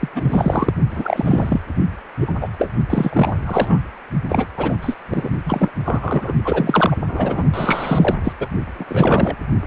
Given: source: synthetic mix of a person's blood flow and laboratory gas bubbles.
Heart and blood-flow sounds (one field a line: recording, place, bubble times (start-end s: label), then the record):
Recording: Doppler ultrasound of blood flow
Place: precordium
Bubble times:
0.00-0.08 s: bubbles
0.15-0.71 s: bubbles
0.91-1.61 s: bubbles
2.21-2.35 s: bubbles
2.40-2.48 s: bubbles
2.58-2.70 s: bubbles
2.90-3.33 s: bubbles
3.46-3.79 s: bubbles
4.29-4.47 s: bubbles
4.57-4.78 s: bubbles
4.81-4.96 s: bubbles
5.10-5.29 s: bubbles
5.44-5.71 s: bubbles
5.85-6.34 s: bubbles
6.44-6.97 s: bubbles
7.07-7.44 s: bubbles
7.54-8.15 s: bubbles
8.24-8.33 s: bubbles
8.39-8.47 s: bubbles
8.79-8.85 s: bubbles
8.88-9.35 s: bubbles
9.64-9.67 s: bubbles
From the record:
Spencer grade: 3 (all of the cardiac periods contain showers or single bubble signals, but not dominating or overriding the cardiac motion signals)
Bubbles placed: only in the low amplitude regions of the cardiac cycle